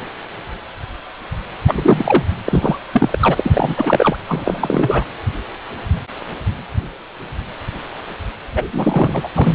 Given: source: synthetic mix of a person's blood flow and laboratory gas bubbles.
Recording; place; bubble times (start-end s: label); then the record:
Doppler ultrasound of blood flow; precordium
1.67-2.23 s: bubbles
2.45-2.79 s: bubbles
2.93-3.19 s: bubbles
3.21-4.17 s: bubbles
4.28-5.05 s: bubbles
8.54-9.28 s: bubbles
9.34-9.55 s: bubbles
From the record:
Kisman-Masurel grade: 333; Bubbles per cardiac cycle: rolling drumbeat, 9 or more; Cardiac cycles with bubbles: 50 to 99%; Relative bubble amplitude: loud (0.450 to 0.775); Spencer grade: 3 (all of the cardiac periods contain showers or single bubble signals, but not dominating or overriding the cardiac motion signals); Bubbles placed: anywhere in the cardiac cycle